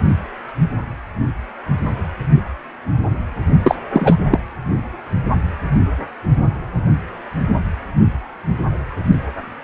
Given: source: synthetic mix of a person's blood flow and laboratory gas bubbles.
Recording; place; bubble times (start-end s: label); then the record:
Doppler ultrasound of blood flow; precordium
3.63-3.75 s: bubbles
3.93-4.17 s: bubbles
4.31-4.39 s: bubbles
From the record:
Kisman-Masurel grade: 213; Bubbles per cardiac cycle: several, 3 to 8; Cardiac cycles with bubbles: 1 to 10%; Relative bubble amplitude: loud (0.450 to 0.775); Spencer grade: 1 (occasional bubble signal discernible with the cardiac motion signal, with majority of cardiac periods free of bubbles); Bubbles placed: only in the low amplitude regions of the cardiac cycle